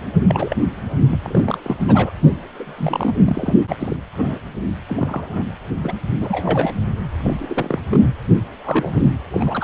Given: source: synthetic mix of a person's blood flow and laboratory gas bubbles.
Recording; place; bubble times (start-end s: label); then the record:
Doppler ultrasound of blood flow; precordium
0.28-0.56 s: bubbles
1.09-1.18 s: bubbles
1.23-1.58 s: bubbles
1.62-1.76 s: bubbles
1.79-2.11 s: bubbles
2.58-3.15 s: bubbles
3.26-3.53 s: bubbles
3.68-3.76 s: bubbles
3.79-3.96 s: bubbles
4.17-4.40 s: bubbles
4.89-5.44 s: bubbles
5.83-5.94 s: bubbles
6.20-6.75 s: bubbles
7.18-7.47 s: bubbles
7.50-7.80 s: bubbles
7.91-8.11 s: bubbles
8.64-9.10 s: bubbles
9.30-9.64 s: bubbles
From the record:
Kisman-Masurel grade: 242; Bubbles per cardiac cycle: several, 3 to 8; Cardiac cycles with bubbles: 100%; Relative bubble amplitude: moderate (0.250 to 0.450); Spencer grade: 3 (all of the cardiac periods contain showers or single bubble signals, but not dominating or overriding the cardiac motion signals); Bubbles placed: anywhere in the cardiac cycle